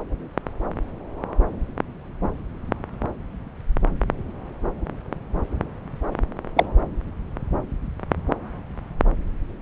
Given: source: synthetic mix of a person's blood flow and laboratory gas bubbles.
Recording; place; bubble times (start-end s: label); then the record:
Doppler ultrasound of blood flow; subclavian vein
6.56-6.66 s: bubbles
From the record:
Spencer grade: 1 (occasional bubble signal discernible with the cardiac motion signal, with majority of cardiac periods free of bubbles); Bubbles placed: anywhere in the cardiac cycle